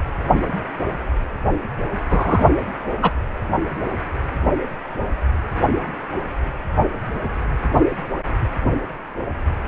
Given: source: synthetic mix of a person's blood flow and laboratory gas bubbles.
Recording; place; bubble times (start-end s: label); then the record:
Doppler ultrasound of blood flow; precordium
2.10-2.46 s: bubbles
3.02-3.11 s: bubbles
From the record:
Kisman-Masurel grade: 113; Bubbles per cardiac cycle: 1 to 2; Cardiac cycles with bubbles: 1 to 10%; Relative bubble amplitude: loud (0.450 to 0.775); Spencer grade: 1 (occasional bubble signal discernible with the cardiac motion signal, with majority of cardiac periods free of bubbles); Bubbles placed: anywhere in the cardiac cycle